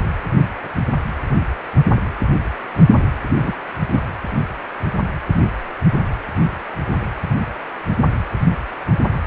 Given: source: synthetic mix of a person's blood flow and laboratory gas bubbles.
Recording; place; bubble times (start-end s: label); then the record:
Doppler ultrasound of blood flow; precordium
3.37-3.52 s: bubbles
3.92-4.00 s: bubbles
From the record:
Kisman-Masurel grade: 113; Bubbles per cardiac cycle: 1 to 2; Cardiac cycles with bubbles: 1 to 10%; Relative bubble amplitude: loud (0.450 to 0.775); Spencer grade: 1 (occasional bubble signal discernible with the cardiac motion signal, with majority of cardiac periods free of bubbles); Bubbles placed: anywhere in the cardiac cycle